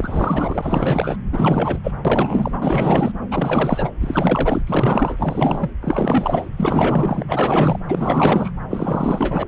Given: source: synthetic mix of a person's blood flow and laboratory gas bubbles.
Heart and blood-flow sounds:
Doppler ultrasound of blood flow; subclavian vein
0.00-1.17 s: bubbles
1.32-1.79 s: bubbles
1.83-1.92 s: bubbles
2.04-3.12 s: bubbles
3.31-3.91 s: bubbles
4.00-5.71 s: bubbles
5.82-6.50 s: bubbles
6.57-7.22 s: bubbles
7.28-7.80 s: bubbles
7.88-8.51 s: bubbles
8.70-9.43 s: bubbles
9.46-9.48 s: bubbles
From the record:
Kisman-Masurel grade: 444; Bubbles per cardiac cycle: continuous sound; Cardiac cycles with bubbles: 100%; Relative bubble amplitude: maximal (0.775 to 0.999); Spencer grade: 4 (maximum detectable bubble signal sounding continuously throughout systole and diastole of every cardiac period, and overriding the amplitude of the normal cardiac signals); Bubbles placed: anywhere in the cardiac cycle

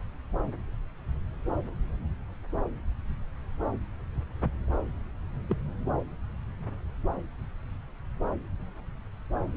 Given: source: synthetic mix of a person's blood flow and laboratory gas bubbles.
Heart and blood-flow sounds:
Doppler ultrasound of blood flow; subclavian vein
5.49-5.57 s: bubbles
From the record:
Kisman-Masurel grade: 121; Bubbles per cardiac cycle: 1 to 2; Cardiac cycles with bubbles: 10 to 50%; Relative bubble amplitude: barely perceptible (0.100 to 0.250); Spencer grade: 2 (many but less than half of the cardiac periods contain bubble signals, singularly or in groups); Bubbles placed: anywhere in the cardiac cycle

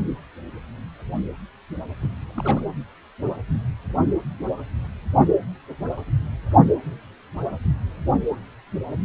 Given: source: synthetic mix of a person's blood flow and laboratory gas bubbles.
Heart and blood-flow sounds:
Doppler ultrasound of blood flow; precordium
2.02-2.08 s: bubbles
2.20-2.62 s: bubbles
From the record:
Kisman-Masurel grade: 211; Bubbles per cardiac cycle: several, 3 to 8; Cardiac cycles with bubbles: 1 to 10%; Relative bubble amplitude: barely perceptible (0.100 to 0.250); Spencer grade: 1 (occasional bubble signal discernible with the cardiac motion signal, with majority of cardiac periods free of bubbles); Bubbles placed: anywhere in the cardiac cycle

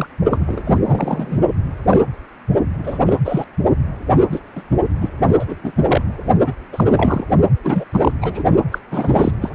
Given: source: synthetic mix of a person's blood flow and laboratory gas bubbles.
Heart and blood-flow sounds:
Doppler ultrasound of blood flow; precordium
0.00-0.07 s: bubbles
0.30-0.62 s: bubbles
0.65-0.79 s: bubbles
0.85-1.40 s: bubbles
1.89-2.00 s: bubbles
2.83-2.99 s: bubbles
3.06-3.17 s: bubbles
3.25-3.44 s: bubbles
4.09-4.19 s: bubbles
4.31-4.39 s: bubbles
4.55-4.62 s: bubbles
5.01-5.09 s: bubbles
5.39-5.55 s: bubbles
5.63-5.71 s: bubbles
5.87-6.01 s: bubbles
6.46-6.53 s: bubbles
6.72-6.84 s: bubbles
6.89-7.25 s: bubbles
7.64-7.84 s: bubbles
7.92-8.11 s: bubbles
8.21-8.44 s: bubbles
8.72-8.78 s: bubbles
8.91-9.31 s: bubbles
9.41-9.50 s: bubbles
From the record:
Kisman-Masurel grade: 242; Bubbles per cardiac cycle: several, 3 to 8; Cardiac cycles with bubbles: 100%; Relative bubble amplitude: moderate (0.250 to 0.450); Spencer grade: 3 (all of the cardiac periods contain showers or single bubble signals, but not dominating or overriding the cardiac motion signals); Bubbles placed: only in the low amplitude regions of the cardiac cycle

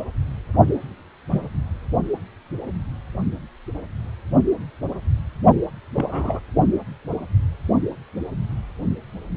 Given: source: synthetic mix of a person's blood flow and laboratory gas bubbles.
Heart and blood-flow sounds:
Doppler ultrasound of blood flow; precordium
1.30-1.41 s: bubbles
5.95-6.40 s: bubbles
From the record:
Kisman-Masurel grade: 122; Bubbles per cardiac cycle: 1 to 2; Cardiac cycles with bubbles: 10 to 50%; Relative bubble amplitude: moderate (0.250 to 0.450); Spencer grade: 2 (many but less than half of the cardiac periods contain bubble signals, singularly or in groups); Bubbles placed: only in the low amplitude regions of the cardiac cycle

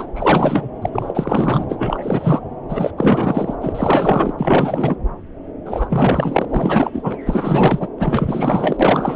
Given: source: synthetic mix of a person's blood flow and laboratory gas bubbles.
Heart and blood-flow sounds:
Doppler ultrasound of blood flow; subclavian vein
0.00-0.07 s: bubbles
0.16-0.69 s: bubbles
0.81-0.90 s: bubbles
0.93-1.66 s: bubbles
1.69-2.41 s: bubbles
2.68-2.91 s: bubbles
2.97-3.54 s: bubbles
3.61-4.33 s: bubbles
4.39-4.96 s: bubbles
5.65-6.45 s: bubbles
6.49-7.18 s: bubbles
7.25-7.89 s: bubbles
7.98-8.77 s: bubbles
8.79-9.16 s: bubbles
From the record:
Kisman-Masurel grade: 444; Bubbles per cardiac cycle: continuous sound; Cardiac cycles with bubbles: 100%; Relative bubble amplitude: maximal (0.775 to 0.999); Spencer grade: 4 (maximum detectable bubble signal sounding continuously throughout systole and diastole of every cardiac period, and overriding the amplitude of the normal cardiac signals); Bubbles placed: anywhere in the cardiac cycle

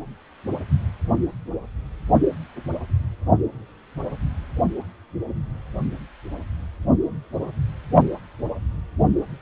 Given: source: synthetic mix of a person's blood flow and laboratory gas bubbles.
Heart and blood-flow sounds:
Doppler ultrasound of blood flow; precordium
no bubbles
From the record:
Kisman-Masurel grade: 000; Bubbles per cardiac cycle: 0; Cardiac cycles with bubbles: 0%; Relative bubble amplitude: no bubbles discernible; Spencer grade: 0 (complete lack of bubble signals)

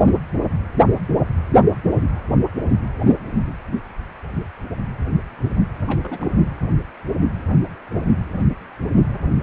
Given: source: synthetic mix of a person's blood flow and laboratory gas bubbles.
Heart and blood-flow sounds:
Doppler ultrasound of blood flow; precordium
5.87-6.35 s: bubbles
From the record:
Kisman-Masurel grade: 221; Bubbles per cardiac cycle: several, 3 to 8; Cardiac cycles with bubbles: 10 to 50%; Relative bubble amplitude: barely perceptible (0.100 to 0.250); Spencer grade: 2 (many but less than half of the cardiac periods contain bubble signals, singularly or in groups); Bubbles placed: anywhere in the cardiac cycle

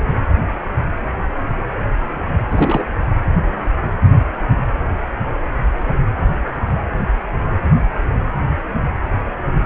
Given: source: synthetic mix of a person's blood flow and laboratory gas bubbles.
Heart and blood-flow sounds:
Doppler ultrasound of blood flow; precordium
2.50-2.86 s: bubbles
From the record:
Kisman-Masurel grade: 212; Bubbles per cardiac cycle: several, 3 to 8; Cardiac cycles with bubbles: 1 to 10%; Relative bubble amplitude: moderate (0.250 to 0.450); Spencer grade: 1 (occasional bubble signal discernible with the cardiac motion signal, with majority of cardiac periods free of bubbles); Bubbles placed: anywhere in the cardiac cycle

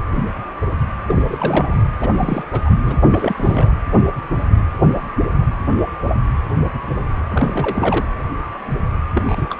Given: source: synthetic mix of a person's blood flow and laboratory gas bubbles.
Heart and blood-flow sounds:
Doppler ultrasound of blood flow; precordium
1.06-1.77 s: bubbles
1.79-1.83 s: bubbles
2.00-2.10 s: bubbles
2.19-2.44 s: bubbles
2.52-2.61 s: bubbles
2.65-2.74 s: bubbles
2.81-2.97 s: bubbles
3.10-3.70 s: bubbles
7.29-8.05 s: bubbles
9.15-9.55 s: bubbles
From the record:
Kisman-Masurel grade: 222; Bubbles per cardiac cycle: several, 3 to 8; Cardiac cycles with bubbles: 10 to 50%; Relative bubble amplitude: moderate (0.250 to 0.450); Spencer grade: 2 (many but less than half of the cardiac periods contain bubble signals, singularly or in groups); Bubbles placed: anywhere in the cardiac cycle

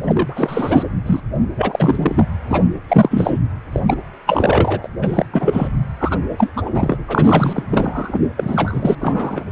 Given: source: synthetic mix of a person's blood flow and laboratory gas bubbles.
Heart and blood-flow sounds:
Doppler ultrasound of blood flow; precordium
0.02-0.83 s: bubbles
1.06-1.20 s: bubbles
1.56-2.25 s: bubbles
2.49-2.62 s: bubbles
2.88-3.38 s: bubbles
3.72-3.80 s: bubbles
3.87-3.97 s: bubbles
4.26-4.88 s: bubbles
5.02-5.25 s: bubbles
5.32-5.68 s: bubbles
5.99-6.18 s: bubbles
6.38-6.50 s: bubbles
6.56-6.71 s: bubbles
6.73-6.97 s: bubbles
7.07-7.63 s: bubbles
7.70-8.20 s: bubbles
8.37-8.95 s: bubbles
9.01-9.44 s: bubbles
From the record:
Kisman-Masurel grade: 343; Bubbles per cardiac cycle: rolling drumbeat, 9 or more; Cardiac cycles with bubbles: 100%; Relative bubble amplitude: loud (0.450 to 0.775); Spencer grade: 3 (all of the cardiac periods contain showers or single bubble signals, but not dominating or overriding the cardiac motion signals); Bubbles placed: anywhere in the cardiac cycle

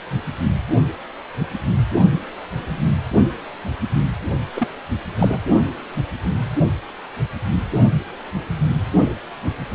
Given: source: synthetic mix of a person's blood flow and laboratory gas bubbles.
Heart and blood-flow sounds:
Doppler ultrasound of blood flow; precordium
4.54-4.67 s: bubbles
5.19-5.38 s: bubbles
From the record:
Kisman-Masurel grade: 212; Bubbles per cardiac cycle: several, 3 to 8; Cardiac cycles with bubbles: 1 to 10%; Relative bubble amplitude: moderate (0.250 to 0.450); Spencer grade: 1 (occasional bubble signal discernible with the cardiac motion signal, with majority of cardiac periods free of bubbles); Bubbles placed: only in the low amplitude regions of the cardiac cycle

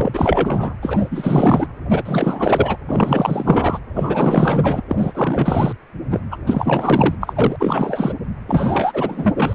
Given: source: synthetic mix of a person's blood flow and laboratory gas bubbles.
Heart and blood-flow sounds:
Doppler ultrasound of blood flow; precordium
0.00-0.74 s: bubbles
0.82-1.67 s: bubbles
1.90-2.02 s: bubbles
2.05-2.77 s: bubbles
2.88-3.79 s: bubbles
3.96-4.81 s: bubbles
4.88-5.72 s: bubbles
6.10-6.21 s: bubbles
6.30-6.37 s: bubbles
6.46-7.15 s: bubbles
7.21-7.56 s: bubbles
7.59-8.15 s: bubbles
8.48-9.55 s: bubbles
From the record:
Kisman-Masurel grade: 444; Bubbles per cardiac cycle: continuous sound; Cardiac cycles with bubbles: 100%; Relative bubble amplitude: maximal (0.775 to 0.999); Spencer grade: 4 (maximum detectable bubble signal sounding continuously throughout systole and diastole of every cardiac period, and overriding the amplitude of the normal cardiac signals); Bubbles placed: anywhere in the cardiac cycle

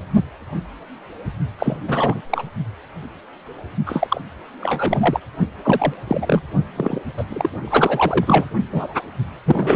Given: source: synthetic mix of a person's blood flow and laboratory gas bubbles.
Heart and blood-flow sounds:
Doppler ultrasound of blood flow; precordium
1.58-1.77 s: bubbles
1.87-2.22 s: bubbles
2.30-2.43 s: bubbles
3.85-4.21 s: bubbles
4.60-5.19 s: bubbles
5.63-5.94 s: bubbles
6.07-6.43 s: bubbles
6.76-7.01 s: bubbles
7.17-7.25 s: bubbles
7.29-7.49 s: bubbles
7.62-8.45 s: bubbles
8.71-8.88 s: bubbles
9.45-9.76 s: bubbles
From the record:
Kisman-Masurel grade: 333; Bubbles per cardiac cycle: rolling drumbeat, 9 or more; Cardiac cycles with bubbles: 50 to 99%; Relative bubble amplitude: loud (0.450 to 0.775); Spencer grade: 3 (all of the cardiac periods contain showers or single bubble signals, but not dominating or overriding the cardiac motion signals); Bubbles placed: only in the low amplitude regions of the cardiac cycle

